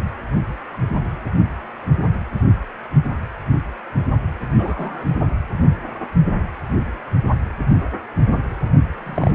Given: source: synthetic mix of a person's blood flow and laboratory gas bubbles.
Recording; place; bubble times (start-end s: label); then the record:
Doppler ultrasound of blood flow; precordium
4.55-5.05 s: bubbles
9.06-9.34 s: bubbles
From the record:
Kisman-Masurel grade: 122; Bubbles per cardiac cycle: 1 to 2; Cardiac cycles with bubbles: 10 to 50%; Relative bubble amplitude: moderate (0.250 to 0.450); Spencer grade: 2 (many but less than half of the cardiac periods contain bubble signals, singularly or in groups); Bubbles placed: anywhere in the cardiac cycle